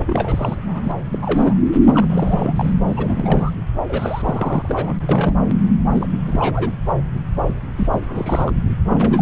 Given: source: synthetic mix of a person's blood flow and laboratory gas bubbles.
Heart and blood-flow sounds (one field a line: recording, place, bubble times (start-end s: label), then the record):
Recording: Doppler ultrasound of blood flow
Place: subclavian vein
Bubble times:
0.06-0.81 s: bubbles
0.84-0.92 s: bubbles
1.11-1.19 s: bubbles
1.21-1.57 s: bubbles
1.89-2.79 s: bubbles
2.88-3.51 s: bubbles
3.89-4.96 s: bubbles
5.09-5.37 s: bubbles
5.88-6.08 s: bubbles
6.27-6.76 s: bubbles
7.75-7.88 s: bubbles
7.92-8.51 s: bubbles
8.85-9.22 s: bubbles
From the record:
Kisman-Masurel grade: 332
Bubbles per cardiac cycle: rolling drumbeat, 9 or more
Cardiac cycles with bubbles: 50 to 99%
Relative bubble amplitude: moderate (0.250 to 0.450)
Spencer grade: 3 (all of the cardiac periods contain showers or single bubble signals, but not dominating or overriding the cardiac motion signals)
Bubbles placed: anywhere in the cardiac cycle